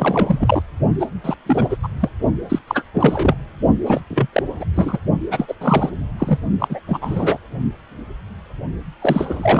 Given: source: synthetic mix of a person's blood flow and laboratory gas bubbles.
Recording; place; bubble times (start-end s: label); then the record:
Doppler ultrasound of blood flow; precordium
0.00-0.62 s: bubbles
0.99-1.06 s: bubbles
1.24-1.35 s: bubbles
1.46-1.77 s: bubbles
1.83-1.88 s: bubbles
2.00-2.09 s: bubbles
2.49-2.59 s: bubbles
2.67-2.83 s: bubbles
2.94-3.36 s: bubbles
3.86-4.00 s: bubbles
4.10-4.27 s: bubbles
4.33-4.42 s: bubbles
4.59-4.64 s: bubbles
4.74-4.99 s: bubbles
5.30-5.54 s: bubbles
5.61-5.89 s: bubbles
6.18-6.39 s: bubbles
6.59-6.80 s: bubbles
6.87-6.98 s: bubbles
7.01-7.38 s: bubbles
9.01-9.60 s: bubbles
From the record:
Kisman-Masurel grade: 333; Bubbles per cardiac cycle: rolling drumbeat, 9 or more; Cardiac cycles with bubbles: 50 to 99%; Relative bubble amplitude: loud (0.450 to 0.775); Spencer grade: 3 (all of the cardiac periods contain showers or single bubble signals, but not dominating or overriding the cardiac motion signals); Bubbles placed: only in the low amplitude regions of the cardiac cycle